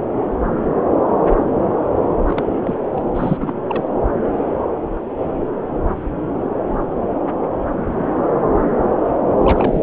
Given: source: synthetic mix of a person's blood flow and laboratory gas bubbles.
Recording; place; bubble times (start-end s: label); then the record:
Doppler ultrasound of blood flow; subclavian vein
2.27-2.44 s: bubbles
2.64-2.77 s: bubbles
2.90-3.02 s: bubbles
3.15-3.37 s: bubbles
3.40-3.62 s: bubbles
3.67-3.84 s: bubbles
9.38-9.82 s: bubbles
From the record:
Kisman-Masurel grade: 222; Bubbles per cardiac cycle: several, 3 to 8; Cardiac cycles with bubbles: 10 to 50%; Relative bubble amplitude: moderate (0.250 to 0.450); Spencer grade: 2 (many but less than half of the cardiac periods contain bubble signals, singularly or in groups); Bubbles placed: anywhere in the cardiac cycle